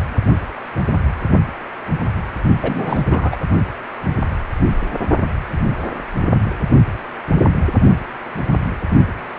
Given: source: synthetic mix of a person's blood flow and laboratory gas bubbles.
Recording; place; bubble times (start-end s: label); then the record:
Doppler ultrasound of blood flow; precordium
2.62-3.01 s: bubbles
3.09-3.36 s: bubbles
From the record:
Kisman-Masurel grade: 222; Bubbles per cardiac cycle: several, 3 to 8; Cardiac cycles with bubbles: 10 to 50%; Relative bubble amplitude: moderate (0.250 to 0.450); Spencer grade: 2 (many but less than half of the cardiac periods contain bubble signals, singularly or in groups); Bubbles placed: only in the low amplitude regions of the cardiac cycle